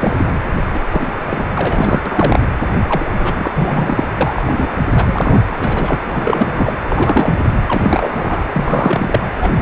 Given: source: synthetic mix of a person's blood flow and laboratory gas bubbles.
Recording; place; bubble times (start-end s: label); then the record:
Doppler ultrasound of blood flow; precordium
0.00-0.34 s: bubbles
0.73-0.80 s: bubbles
0.92-1.45 s: bubbles
1.55-2.02 s: bubbles
2.05-2.46 s: bubbles
2.87-3.05 s: bubbles
3.19-3.51 s: bubbles
3.54-4.05 s: bubbles
4.21-4.69 s: bubbles
4.95-5.40 s: bubbles
5.49-5.57 s: bubbles
5.60-5.98 s: bubbles
6.06-6.74 s: bubbles
6.90-7.45 s: bubbles
7.68-8.46 s: bubbles
8.53-9.20 s: bubbles
9.41-9.52 s: bubbles
9.55-9.62 s: bubbles
From the record:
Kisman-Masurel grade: 342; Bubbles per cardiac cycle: rolling drumbeat, 9 or more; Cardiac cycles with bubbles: 100%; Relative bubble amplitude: moderate (0.250 to 0.450); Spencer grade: 3 (all of the cardiac periods contain showers or single bubble signals, but not dominating or overriding the cardiac motion signals); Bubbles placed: anywhere in the cardiac cycle